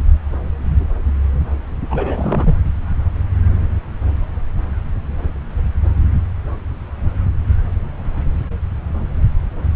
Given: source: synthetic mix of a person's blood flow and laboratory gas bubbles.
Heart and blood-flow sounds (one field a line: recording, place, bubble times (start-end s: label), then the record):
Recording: Doppler ultrasound of blood flow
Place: subclavian vein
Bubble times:
1.90-2.56 s: bubbles
From the record:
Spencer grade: 1 (occasional bubble signal discernible with the cardiac motion signal, with majority of cardiac periods free of bubbles)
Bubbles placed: anywhere in the cardiac cycle